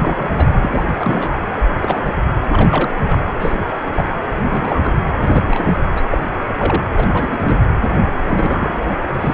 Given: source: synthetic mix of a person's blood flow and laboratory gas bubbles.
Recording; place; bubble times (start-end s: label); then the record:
Doppler ultrasound of blood flow; precordium
0.00-0.51 s: bubbles
0.61-0.84 s: bubbles
0.98-1.35 s: bubbles
1.80-1.97 s: bubbles
2.44-2.93 s: bubbles
3.01-3.19 s: bubbles
3.39-3.55 s: bubbles
3.94-4.04 s: bubbles
4.49-4.80 s: bubbles
4.83-4.91 s: bubbles
5.20-5.75 s: bubbles
5.94-6.02 s: bubbles
6.11-6.23 s: bubbles
6.56-6.83 s: bubbles
6.92-7.07 s: bubbles
7.12-7.60 s: bubbles
8.26-9.04 s: bubbles
9.20-9.34 s: bubbles
From the record:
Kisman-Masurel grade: 242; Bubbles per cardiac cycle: several, 3 to 8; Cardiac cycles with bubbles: 100%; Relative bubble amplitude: moderate (0.250 to 0.450); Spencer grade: 3 (all of the cardiac periods contain showers or single bubble signals, but not dominating or overriding the cardiac motion signals); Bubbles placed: anywhere in the cardiac cycle